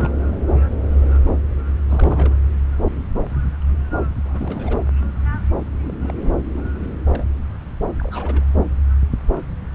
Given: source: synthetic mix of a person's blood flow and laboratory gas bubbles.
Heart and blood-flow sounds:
Doppler ultrasound of blood flow; subclavian vein
0.00-0.12 s: bubbles
1.90-2.36 s: bubbles
4.24-4.78 s: bubbles
5.83-6.13 s: bubbles
6.22-6.30 s: bubbles
6.49-6.71 s: bubbles
6.83-6.89 s: bubbles
7.06-7.25 s: bubbles
7.99-8.45 s: bubbles
From the record:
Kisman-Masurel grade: 221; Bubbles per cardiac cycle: several, 3 to 8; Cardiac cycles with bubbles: 10 to 50%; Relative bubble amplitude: barely perceptible (0.100 to 0.250); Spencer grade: 2 (many but less than half of the cardiac periods contain bubble signals, singularly or in groups); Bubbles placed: anywhere in the cardiac cycle

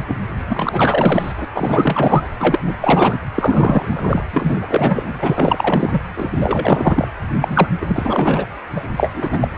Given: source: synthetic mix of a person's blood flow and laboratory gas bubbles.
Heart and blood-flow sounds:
Doppler ultrasound of blood flow; precordium
0.00-0.04 s: bubbles
0.07-0.19 s: bubbles
0.49-1.32 s: bubbles
1.36-1.45 s: bubbles
1.54-2.29 s: bubbles
2.40-2.74 s: bubbles
2.81-3.18 s: bubbles
3.34-4.24 s: bubbles
4.33-6.01 s: bubbles
6.17-7.08 s: bubbles
7.41-7.69 s: bubbles
7.81-8.46 s: bubbles
8.76-8.81 s: bubbles
8.96-9.12 s: bubbles
9.14-9.38 s: bubbles
9.41-9.49 s: bubbles
9.56-9.58 s: bubbles
From the record:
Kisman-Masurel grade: 444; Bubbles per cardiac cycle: continuous sound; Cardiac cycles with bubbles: 100%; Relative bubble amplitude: maximal (0.775 to 0.999); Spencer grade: 4 (maximum detectable bubble signal sounding continuously throughout systole and diastole of every cardiac period, and overriding the amplitude of the normal cardiac signals); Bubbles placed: anywhere in the cardiac cycle

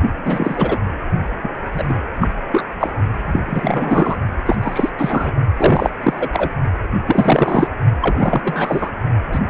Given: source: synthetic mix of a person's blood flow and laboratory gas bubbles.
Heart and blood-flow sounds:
Doppler ultrasound of blood flow; precordium
0.00-0.10 s: bubbles
0.25-0.78 s: bubbles
1.43-1.50 s: bubbles
1.73-2.00 s: bubbles
2.20-2.27 s: bubbles
2.50-2.62 s: bubbles
2.79-2.90 s: bubbles
3.25-3.42 s: bubbles
3.45-4.17 s: bubbles
4.46-4.55 s: bubbles
4.62-4.90 s: bubbles
4.99-5.33 s: bubbles
5.56-5.91 s: bubbles
6.03-6.29 s: bubbles
6.33-6.49 s: bubbles
7.07-7.68 s: bubbles
8.01-8.92 s: bubbles
9.32-9.39 s: bubbles
9.47-9.50 s: bubbles
From the record:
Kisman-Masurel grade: 343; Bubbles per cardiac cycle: rolling drumbeat, 9 or more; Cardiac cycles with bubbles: 100%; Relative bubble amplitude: loud (0.450 to 0.775); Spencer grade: 3 (all of the cardiac periods contain showers or single bubble signals, but not dominating or overriding the cardiac motion signals); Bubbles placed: only in the low amplitude regions of the cardiac cycle

